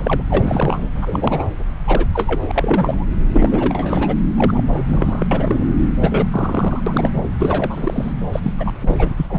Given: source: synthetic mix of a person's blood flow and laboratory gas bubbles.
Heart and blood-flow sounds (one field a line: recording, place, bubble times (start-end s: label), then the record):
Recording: Doppler ultrasound of blood flow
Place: subclavian vein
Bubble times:
0.00-0.23 s: bubbles
0.30-0.89 s: bubbles
0.95-1.49 s: bubbles
1.86-2.06 s: bubbles
2.13-2.51 s: bubbles
2.54-3.05 s: bubbles
3.33-4.15 s: bubbles
4.36-4.68 s: bubbles
4.74-4.83 s: bubbles
4.86-5.27 s: bubbles
5.31-5.64 s: bubbles
6.00-6.28 s: bubbles
6.31-6.81 s: bubbles
6.86-7.10 s: bubbles
7.39-8.12 s: bubbles
8.32-8.40 s: bubbles
8.43-8.53 s: bubbles
8.59-8.72 s: bubbles
8.80-8.96 s: bubbles
8.98-9.13 s: bubbles
9.17-9.27 s: bubbles
9.29-9.39 s: bubbles
From the record:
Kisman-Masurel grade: 342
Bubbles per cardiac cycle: rolling drumbeat, 9 or more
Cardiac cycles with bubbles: 100%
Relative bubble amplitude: moderate (0.250 to 0.450)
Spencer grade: 3 (all of the cardiac periods contain showers or single bubble signals, but not dominating or overriding the cardiac motion signals)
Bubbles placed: anywhere in the cardiac cycle